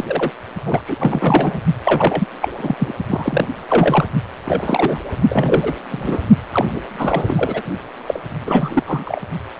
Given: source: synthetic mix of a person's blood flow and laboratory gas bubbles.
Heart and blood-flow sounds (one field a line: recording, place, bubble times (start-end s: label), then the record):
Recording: Doppler ultrasound of blood flow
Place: precordium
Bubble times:
0.00-0.32 s: bubbles
0.66-0.81 s: bubbles
0.86-0.95 s: bubbles
0.99-1.61 s: bubbles
1.83-2.27 s: bubbles
2.41-2.49 s: bubbles
2.58-2.76 s: bubbles
2.79-2.95 s: bubbles
3.08-3.48 s: bubbles
3.68-4.05 s: bubbles
4.45-4.98 s: bubbles
5.29-5.75 s: bubbles
5.90-6.18 s: bubbles
6.52-6.65 s: bubbles
6.70-6.80 s: bubbles
6.96-7.62 s: bubbles
8.07-8.20 s: bubbles
8.46-8.83 s: bubbles
8.87-9.20 s: bubbles
From the record:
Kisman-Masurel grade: 333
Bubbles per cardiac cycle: rolling drumbeat, 9 or more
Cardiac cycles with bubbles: 50 to 99%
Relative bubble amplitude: loud (0.450 to 0.775)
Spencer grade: 3 (all of the cardiac periods contain showers or single bubble signals, but not dominating or overriding the cardiac motion signals)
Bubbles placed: only in the low amplitude regions of the cardiac cycle